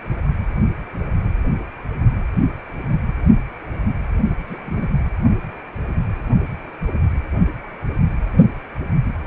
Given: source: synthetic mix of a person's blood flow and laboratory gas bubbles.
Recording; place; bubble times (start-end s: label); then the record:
Doppler ultrasound of blood flow; precordium
4.48-4.59 s: bubbles
4.66-4.88 s: bubbles
From the record:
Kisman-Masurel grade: 111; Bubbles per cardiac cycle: 1 to 2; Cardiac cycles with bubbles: 1 to 10%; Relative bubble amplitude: barely perceptible (0.100 to 0.250); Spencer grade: 1 (occasional bubble signal discernible with the cardiac motion signal, with majority of cardiac periods free of bubbles); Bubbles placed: only in the low amplitude regions of the cardiac cycle